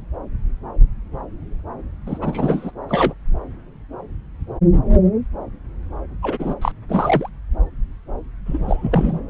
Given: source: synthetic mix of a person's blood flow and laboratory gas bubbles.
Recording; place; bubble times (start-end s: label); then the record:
Doppler ultrasound of blood flow; subclavian vein
2.06-2.71 s: bubbles
2.88-3.14 s: bubbles
6.23-6.54 s: bubbles
6.62-6.72 s: bubbles
6.89-7.29 s: bubbles
8.46-9.21 s: bubbles
From the record:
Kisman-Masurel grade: 222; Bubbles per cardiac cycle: several, 3 to 8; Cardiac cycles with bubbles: 10 to 50%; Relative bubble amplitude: moderate (0.250 to 0.450); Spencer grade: 2 (many but less than half of the cardiac periods contain bubble signals, singularly or in groups); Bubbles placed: anywhere in the cardiac cycle